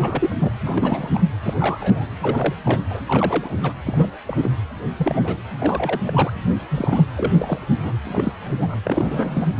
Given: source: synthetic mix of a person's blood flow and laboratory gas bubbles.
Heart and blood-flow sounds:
Doppler ultrasound of blood flow; precordium
0.00-0.35 s: bubbles
0.41-0.52 s: bubbles
0.64-1.10 s: bubbles
1.14-1.21 s: bubbles
1.43-2.06 s: bubbles
2.21-2.54 s: bubbles
2.64-2.81 s: bubbles
2.90-3.00 s: bubbles
3.08-3.73 s: bubbles
3.85-4.06 s: bubbles
4.25-4.51 s: bubbles
4.96-5.37 s: bubbles
5.59-6.00 s: bubbles
6.04-6.31 s: bubbles
6.69-7.04 s: bubbles
7.16-7.33 s: bubbles
7.38-7.59 s: bubbles
7.82-7.93 s: bubbles
8.04-8.32 s: bubbles
8.46-8.79 s: bubbles
8.84-9.50 s: bubbles
From the record:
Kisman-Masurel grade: 242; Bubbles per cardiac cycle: several, 3 to 8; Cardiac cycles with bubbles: 100%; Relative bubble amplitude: moderate (0.250 to 0.450); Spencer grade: 3 (all of the cardiac periods contain showers or single bubble signals, but not dominating or overriding the cardiac motion signals); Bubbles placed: anywhere in the cardiac cycle

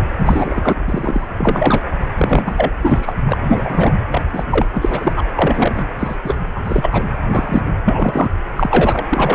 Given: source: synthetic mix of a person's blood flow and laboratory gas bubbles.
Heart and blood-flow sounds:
Doppler ultrasound of blood flow; precordium
0.25-0.74 s: bubbles
0.88-1.27 s: bubbles
1.38-1.81 s: bubbles
2.17-2.75 s: bubbles
2.83-3.14 s: bubbles
3.27-3.38 s: bubbles
3.44-3.94 s: bubbles
4.11-4.22 s: bubbles
4.33-4.46 s: bubbles
4.50-4.67 s: bubbles
4.71-5.13 s: bubbles
5.16-5.25 s: bubbles
5.36-5.90 s: bubbles
5.99-6.16 s: bubbles
6.25-6.35 s: bubbles
6.55-6.60 s: bubbles
6.64-7.04 s: bubbles
7.29-7.62 s: bubbles
7.85-8.30 s: bubbles
8.56-9.06 s: bubbles
9.09-9.35 s: bubbles
From the record:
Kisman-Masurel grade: 243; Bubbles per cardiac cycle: several, 3 to 8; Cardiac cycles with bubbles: 100%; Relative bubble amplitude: loud (0.450 to 0.775); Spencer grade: 3 (all of the cardiac periods contain showers or single bubble signals, but not dominating or overriding the cardiac motion signals); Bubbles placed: anywhere in the cardiac cycle

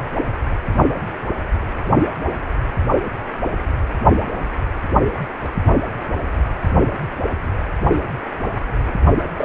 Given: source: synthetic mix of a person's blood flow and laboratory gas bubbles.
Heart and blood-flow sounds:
Doppler ultrasound of blood flow; precordium
9.33-9.45 s: bubbles
From the record:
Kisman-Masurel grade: 112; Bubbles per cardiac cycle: 1 to 2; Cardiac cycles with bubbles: 1 to 10%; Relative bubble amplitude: moderate (0.250 to 0.450); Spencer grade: 1 (occasional bubble signal discernible with the cardiac motion signal, with majority of cardiac periods free of bubbles); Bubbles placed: only in the low amplitude regions of the cardiac cycle

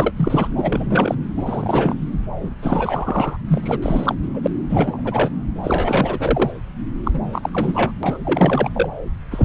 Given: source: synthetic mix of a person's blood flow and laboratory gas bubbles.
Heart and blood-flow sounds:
Doppler ultrasound of blood flow; subclavian vein
0.00-0.14 s: bubbles
0.16-0.48 s: bubbles
0.56-1.15 s: bubbles
1.36-1.95 s: bubbles
2.40-2.50 s: bubbles
2.62-3.37 s: bubbles
3.50-4.15 s: bubbles
4.33-4.40 s: bubbles
4.42-4.47 s: bubbles
4.69-5.29 s: bubbles
5.63-6.51 s: bubbles
7.04-7.20 s: bubbles
7.33-7.92 s: bubbles
8.03-8.18 s: bubbles
8.24-8.70 s: bubbles
8.73-8.89 s: bubbles
9.30-9.45 s: bubbles
From the record:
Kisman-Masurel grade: 343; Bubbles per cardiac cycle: rolling drumbeat, 9 or more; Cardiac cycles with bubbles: 100%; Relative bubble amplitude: loud (0.450 to 0.775); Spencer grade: 3 (all of the cardiac periods contain showers or single bubble signals, but not dominating or overriding the cardiac motion signals); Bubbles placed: anywhere in the cardiac cycle

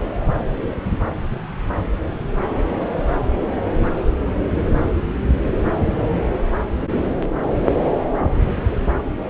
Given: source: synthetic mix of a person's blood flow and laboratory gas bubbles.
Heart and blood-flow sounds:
Doppler ultrasound of blood flow; subclavian vein
no bubbles
From the record:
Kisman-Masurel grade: 000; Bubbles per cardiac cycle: 0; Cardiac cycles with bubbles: 0%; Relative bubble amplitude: no bubbles discernible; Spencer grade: 0 (complete lack of bubble signals)

